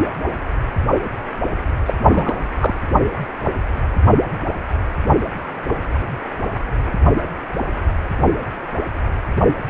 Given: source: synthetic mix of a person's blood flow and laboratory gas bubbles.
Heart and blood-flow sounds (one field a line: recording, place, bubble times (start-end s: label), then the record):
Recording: Doppler ultrasound of blood flow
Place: precordium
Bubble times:
1.85-1.93 s: bubbles
2.02-2.36 s: bubbles
2.59-2.74 s: bubbles
From the record:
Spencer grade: 1 (occasional bubble signal discernible with the cardiac motion signal, with majority of cardiac periods free of bubbles)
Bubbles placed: only in the low amplitude regions of the cardiac cycle